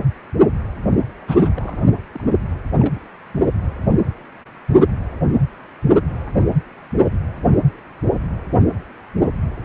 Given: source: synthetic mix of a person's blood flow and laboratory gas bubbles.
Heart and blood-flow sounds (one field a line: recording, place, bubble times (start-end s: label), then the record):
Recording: Doppler ultrasound of blood flow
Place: precordium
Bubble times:
1.27-1.51 s: bubbles
1.54-1.77 s: bubbles
2.14-2.23 s: bubbles
2.79-2.99 s: bubbles
From the record:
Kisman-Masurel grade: 211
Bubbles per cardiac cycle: several, 3 to 8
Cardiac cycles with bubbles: 1 to 10%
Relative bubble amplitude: barely perceptible (0.100 to 0.250)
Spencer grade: 1 (occasional bubble signal discernible with the cardiac motion signal, with majority of cardiac periods free of bubbles)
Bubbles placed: anywhere in the cardiac cycle